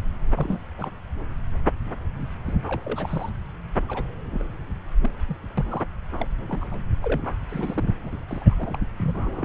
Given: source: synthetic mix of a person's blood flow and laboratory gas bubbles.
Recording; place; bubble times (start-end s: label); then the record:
Doppler ultrasound of blood flow; subclavian vein
0.35-0.59 s: bubbles
0.78-0.91 s: bubbles
2.45-2.56 s: bubbles
2.62-3.31 s: bubbles
3.88-4.04 s: bubbles
4.31-4.46 s: bubbles
5.02-5.11 s: bubbles
5.26-5.37 s: bubbles
5.57-5.84 s: bubbles
6.12-6.32 s: bubbles
6.48-6.80 s: bubbles
7.01-7.36 s: bubbles
7.49-7.94 s: bubbles
8.03-8.25 s: bubbles
8.28-8.54 s: bubbles
8.57-8.79 s: bubbles
8.96-9.45 s: bubbles
From the record:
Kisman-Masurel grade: 232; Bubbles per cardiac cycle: several, 3 to 8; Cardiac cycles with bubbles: 50 to 99%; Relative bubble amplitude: moderate (0.250 to 0.450); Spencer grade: 3 (all of the cardiac periods contain showers or single bubble signals, but not dominating or overriding the cardiac motion signals); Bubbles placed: anywhere in the cardiac cycle